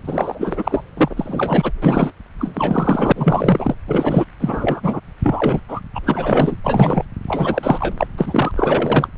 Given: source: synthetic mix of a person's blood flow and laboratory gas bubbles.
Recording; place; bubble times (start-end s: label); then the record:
Doppler ultrasound of blood flow; subclavian vein
0.04-0.83 s: bubbles
0.97-1.72 s: bubbles
1.82-2.11 s: bubbles
2.38-3.12 s: bubbles
3.16-3.74 s: bubbles
3.87-4.26 s: bubbles
4.40-5.00 s: bubbles
5.23-5.61 s: bubbles
5.68-5.80 s: bubbles
5.95-6.00 s: bubbles
6.03-6.57 s: bubbles
6.64-7.04 s: bubbles
7.28-7.92 s: bubbles
7.98-8.07 s: bubbles
8.17-8.52 s: bubbles
8.56-9.08 s: bubbles
From the record:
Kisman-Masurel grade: 343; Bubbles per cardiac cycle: rolling drumbeat, 9 or more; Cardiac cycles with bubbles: 100%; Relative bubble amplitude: loud (0.450 to 0.775); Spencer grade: 3 (all of the cardiac periods contain showers or single bubble signals, but not dominating or overriding the cardiac motion signals); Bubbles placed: anywhere in the cardiac cycle